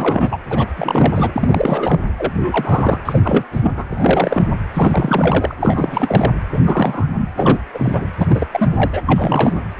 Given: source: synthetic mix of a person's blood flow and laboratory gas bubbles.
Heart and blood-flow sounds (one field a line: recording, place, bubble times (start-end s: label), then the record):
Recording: Doppler ultrasound of blood flow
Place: precordium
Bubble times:
0.00-0.38 s: bubbles
0.50-0.67 s: bubbles
0.76-2.10 s: bubbles
2.18-2.99 s: bubbles
3.05-3.44 s: bubbles
3.52-3.72 s: bubbles
3.77-3.84 s: bubbles
3.92-4.48 s: bubbles
4.74-5.55 s: bubbles
5.61-6.32 s: bubbles
6.52-6.61 s: bubbles
6.65-7.07 s: bubbles
7.13-7.29 s: bubbles
7.37-7.58 s: bubbles
7.74-8.05 s: bubbles
8.18-8.46 s: bubbles
8.51-9.01 s: bubbles
9.06-9.61 s: bubbles
From the record:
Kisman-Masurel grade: 343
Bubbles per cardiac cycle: rolling drumbeat, 9 or more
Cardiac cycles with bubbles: 100%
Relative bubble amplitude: loud (0.450 to 0.775)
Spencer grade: 3 (all of the cardiac periods contain showers or single bubble signals, but not dominating or overriding the cardiac motion signals)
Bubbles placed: anywhere in the cardiac cycle